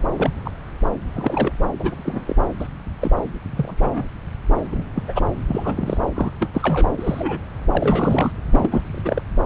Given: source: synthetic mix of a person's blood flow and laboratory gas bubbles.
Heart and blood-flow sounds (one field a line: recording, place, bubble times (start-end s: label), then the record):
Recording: Doppler ultrasound of blood flow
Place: subclavian vein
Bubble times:
0.17-0.31 s: bubbles
0.45-0.51 s: bubbles
1.15-1.52 s: bubbles
1.79-2.36 s: bubbles
2.59-2.67 s: bubbles
3.01-3.11 s: bubbles
3.55-4.05 s: bubbles
4.53-4.85 s: bubbles
4.96-5.21 s: bubbles
5.48-5.97 s: bubbles
6.15-6.30 s: bubbles
6.39-6.51 s: bubbles
6.54-6.89 s: bubbles
6.97-7.39 s: bubbles
7.73-8.32 s: bubbles
8.53-9.24 s: bubbles
9.43-9.46 s: bubbles
From the record:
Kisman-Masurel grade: 242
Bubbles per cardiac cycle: several, 3 to 8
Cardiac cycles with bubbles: 100%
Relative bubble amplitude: moderate (0.250 to 0.450)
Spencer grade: 3 (all of the cardiac periods contain showers or single bubble signals, but not dominating or overriding the cardiac motion signals)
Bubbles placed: anywhere in the cardiac cycle